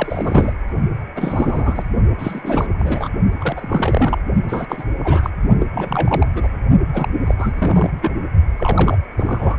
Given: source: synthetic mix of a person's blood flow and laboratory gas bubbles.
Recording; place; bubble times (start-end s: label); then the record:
Doppler ultrasound of blood flow; precordium
0.00-0.53 s: bubbles
1.15-1.83 s: bubbles
2.19-2.67 s: bubbles
2.78-3.10 s: bubbles
3.40-4.21 s: bubbles
4.48-4.83 s: bubbles
5.00-5.30 s: bubbles
5.60-5.66 s: bubbles
5.73-6.28 s: bubbles
6.36-6.52 s: bubbles
6.94-7.08 s: bubbles
7.25-7.35 s: bubbles
7.39-7.90 s: bubbles
8.01-8.14 s: bubbles
8.57-8.98 s: bubbles
9.17-9.57 s: bubbles
From the record:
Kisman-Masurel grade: 342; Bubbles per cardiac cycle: rolling drumbeat, 9 or more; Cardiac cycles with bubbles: 100%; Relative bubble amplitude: moderate (0.250 to 0.450); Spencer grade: 3 (all of the cardiac periods contain showers or single bubble signals, but not dominating or overriding the cardiac motion signals); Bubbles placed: only in the low amplitude regions of the cardiac cycle